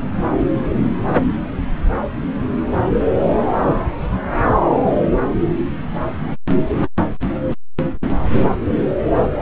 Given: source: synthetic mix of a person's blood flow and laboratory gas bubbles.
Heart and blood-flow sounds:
Doppler ultrasound of blood flow; subclavian vein
3.23-3.33 s: bubbles
3.52-3.58 s: bubbles
From the record:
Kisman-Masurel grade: 111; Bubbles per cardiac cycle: 1 to 2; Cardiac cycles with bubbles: 1 to 10%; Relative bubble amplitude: barely perceptible (0.100 to 0.250); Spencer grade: 1 (occasional bubble signal discernible with the cardiac motion signal, with majority of cardiac periods free of bubbles); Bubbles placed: anywhere in the cardiac cycle

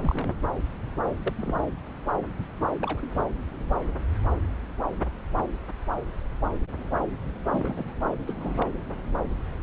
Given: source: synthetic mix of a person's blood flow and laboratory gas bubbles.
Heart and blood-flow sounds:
Doppler ultrasound of blood flow; subclavian vein
0.02-0.40 s: bubbles
1.17-1.31 s: bubbles
1.38-1.64 s: bubbles
2.80-3.23 s: bubbles
7.50-8.05 s: bubbles
8.27-8.67 s: bubbles
9.61-9.63 s: bubbles
From the record:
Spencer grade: 2 (many but less than half of the cardiac periods contain bubble signals, singularly or in groups); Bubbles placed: anywhere in the cardiac cycle

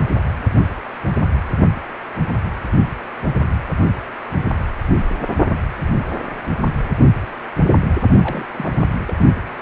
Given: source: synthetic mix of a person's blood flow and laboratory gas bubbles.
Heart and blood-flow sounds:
Doppler ultrasound of blood flow; precordium
8.22-8.46 s: bubbles
8.58-8.85 s: bubbles
9.02-9.20 s: bubbles
From the record:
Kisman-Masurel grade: 211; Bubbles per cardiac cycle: several, 3 to 8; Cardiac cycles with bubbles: 1 to 10%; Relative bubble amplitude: barely perceptible (0.100 to 0.250); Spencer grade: 1 (occasional bubble signal discernible with the cardiac motion signal, with majority of cardiac periods free of bubbles); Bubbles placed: only in the low amplitude regions of the cardiac cycle

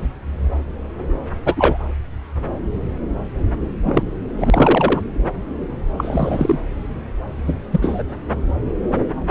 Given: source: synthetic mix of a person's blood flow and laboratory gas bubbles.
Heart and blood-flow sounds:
Doppler ultrasound of blood flow; subclavian vein
1.45-1.77 s: bubbles
3.83-4.03 s: bubbles
4.36-5.01 s: bubbles
5.97-6.58 s: bubbles
7.46-7.55 s: bubbles
7.71-8.04 s: bubbles
From the record:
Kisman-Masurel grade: 223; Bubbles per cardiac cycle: several, 3 to 8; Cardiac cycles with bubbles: 10 to 50%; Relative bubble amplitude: loud (0.450 to 0.775); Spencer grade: 2 (many but less than half of the cardiac periods contain bubble signals, singularly or in groups); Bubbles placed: anywhere in the cardiac cycle

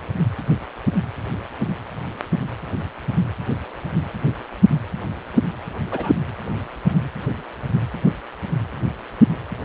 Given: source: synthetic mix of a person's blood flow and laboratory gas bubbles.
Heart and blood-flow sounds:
Doppler ultrasound of blood flow; precordium
5.91-6.16 s: bubbles
From the record:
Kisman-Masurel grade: 112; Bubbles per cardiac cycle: 1 to 2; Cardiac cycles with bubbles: 1 to 10%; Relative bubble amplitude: moderate (0.250 to 0.450); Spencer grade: 1 (occasional bubble signal discernible with the cardiac motion signal, with majority of cardiac periods free of bubbles); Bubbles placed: anywhere in the cardiac cycle

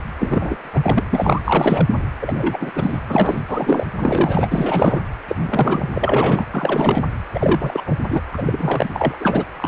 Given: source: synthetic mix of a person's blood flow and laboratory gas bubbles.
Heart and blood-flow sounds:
Doppler ultrasound of blood flow; precordium
0.19-0.69 s: bubbles
0.73-1.03 s: bubbles
1.11-1.42 s: bubbles
1.44-1.88 s: bubbles
2.21-2.72 s: bubbles
2.75-2.99 s: bubbles
3.09-3.40 s: bubbles
3.48-3.85 s: bubbles
3.99-4.49 s: bubbles
4.52-5.01 s: bubbles
5.28-5.36 s: bubbles
5.39-5.90 s: bubbles
5.95-6.44 s: bubbles
6.52-7.04 s: bubbles
7.33-7.82 s: bubbles
7.86-7.98 s: bubbles
8.09-8.21 s: bubbles
8.32-8.89 s: bubbles
8.92-9.16 s: bubbles
9.20-9.45 s: bubbles
9.56-9.68 s: bubbles
From the record:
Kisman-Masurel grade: 343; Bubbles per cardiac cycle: rolling drumbeat, 9 or more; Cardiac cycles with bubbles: 100%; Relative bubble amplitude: loud (0.450 to 0.775); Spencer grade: 3 (all of the cardiac periods contain showers or single bubble signals, but not dominating or overriding the cardiac motion signals); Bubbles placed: anywhere in the cardiac cycle

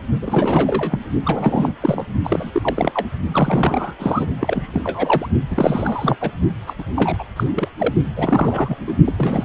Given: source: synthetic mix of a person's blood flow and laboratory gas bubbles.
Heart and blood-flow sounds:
Doppler ultrasound of blood flow; precordium
0.22-0.99 s: bubbles
1.25-1.72 s: bubbles
1.81-2.05 s: bubbles
2.24-2.51 s: bubbles
2.53-3.06 s: bubbles
3.31-3.96 s: bubbles
3.99-4.26 s: bubbles
4.40-4.80 s: bubbles
4.84-5.28 s: bubbles
5.48-6.17 s: bubbles
6.21-6.30 s: bubbles
6.67-6.73 s: bubbles
6.78-6.84 s: bubbles
6.96-7.24 s: bubbles
7.36-7.44 s: bubbles
7.54-7.68 s: bubbles
7.78-7.93 s: bubbles
8.17-8.77 s: bubbles
8.87-8.96 s: bubbles
9.04-9.12 s: bubbles
9.18-9.45 s: bubbles
From the record:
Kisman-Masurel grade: 342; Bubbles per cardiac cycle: rolling drumbeat, 9 or more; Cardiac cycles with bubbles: 100%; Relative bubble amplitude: moderate (0.250 to 0.450); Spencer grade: 3 (all of the cardiac periods contain showers or single bubble signals, but not dominating or overriding the cardiac motion signals); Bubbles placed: only in the low amplitude regions of the cardiac cycle

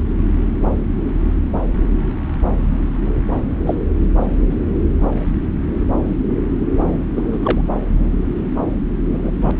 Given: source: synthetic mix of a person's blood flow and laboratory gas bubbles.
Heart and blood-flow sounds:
Doppler ultrasound of blood flow; subclavian vein
3.66-3.75 s: bubbles
4.50-4.55 s: bubbles
7.15-7.61 s: bubbles
9.13-9.31 s: bubbles
9.41-9.54 s: bubbles
From the record:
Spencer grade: 2 (many but less than half of the cardiac periods contain bubble signals, singularly or in groups); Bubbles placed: anywhere in the cardiac cycle

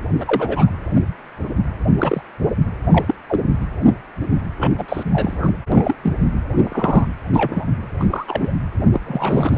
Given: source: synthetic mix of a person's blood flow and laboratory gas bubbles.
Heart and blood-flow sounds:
Doppler ultrasound of blood flow; precordium
0.20-0.70 s: bubbles
1.98-2.21 s: bubbles
2.90-3.15 s: bubbles
3.29-3.40 s: bubbles
4.58-5.04 s: bubbles
5.12-5.50 s: bubbles
5.71-5.96 s: bubbles
6.04-6.13 s: bubbles
6.62-7.05 s: bubbles
7.33-7.65 s: bubbles
7.99-8.05 s: bubbles
8.10-8.54 s: bubbles
8.92-9.01 s: bubbles
9.04-9.58 s: bubbles
From the record:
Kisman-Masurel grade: 232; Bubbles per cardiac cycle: several, 3 to 8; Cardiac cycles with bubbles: 50 to 99%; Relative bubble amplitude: moderate (0.250 to 0.450); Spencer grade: 3 (all of the cardiac periods contain showers or single bubble signals, but not dominating or overriding the cardiac motion signals); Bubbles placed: anywhere in the cardiac cycle

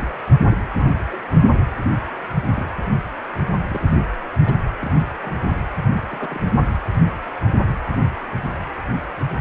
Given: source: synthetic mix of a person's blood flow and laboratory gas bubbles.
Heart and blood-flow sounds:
Doppler ultrasound of blood flow; precordium
0.00-0.22 s: bubbles
0.51-0.57 s: bubbles
0.78-0.84 s: bubbles
1.11-1.22 s: bubbles
1.41-1.46 s: bubbles
2.56-2.67 s: bubbles
3.69-3.88 s: bubbles
4.45-4.52 s: bubbles
4.79-4.92 s: bubbles
5.21-5.38 s: bubbles
6.09-6.40 s: bubbles
From the record:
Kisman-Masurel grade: 121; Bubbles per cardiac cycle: 1 to 2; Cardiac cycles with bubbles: 10 to 50%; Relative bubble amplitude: barely perceptible (0.100 to 0.250); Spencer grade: 2 (many but less than half of the cardiac periods contain bubble signals, singularly or in groups); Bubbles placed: anywhere in the cardiac cycle

